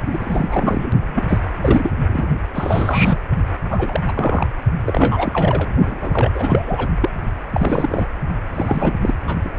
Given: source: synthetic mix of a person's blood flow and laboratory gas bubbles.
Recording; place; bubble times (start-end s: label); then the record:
Doppler ultrasound of blood flow; precordium
0.05-0.91 s: bubbles
1.00-1.41 s: bubbles
1.60-1.91 s: bubbles
2.08-2.28 s: bubbles
2.53-3.18 s: bubbles
3.70-4.00 s: bubbles
4.08-4.12 s: bubbles
4.15-4.48 s: bubbles
4.86-5.70 s: bubbles
5.86-6.31 s: bubbles
6.35-6.89 s: bubbles
7.00-7.10 s: bubbles
7.53-8.06 s: bubbles
8.54-8.97 s: bubbles
9.03-9.14 s: bubbles
9.27-9.37 s: bubbles
9.44-9.51 s: bubbles
From the record:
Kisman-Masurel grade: 342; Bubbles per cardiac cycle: rolling drumbeat, 9 or more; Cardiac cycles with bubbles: 100%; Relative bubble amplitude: moderate (0.250 to 0.450); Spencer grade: 3 (all of the cardiac periods contain showers or single bubble signals, but not dominating or overriding the cardiac motion signals); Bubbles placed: only in the low amplitude regions of the cardiac cycle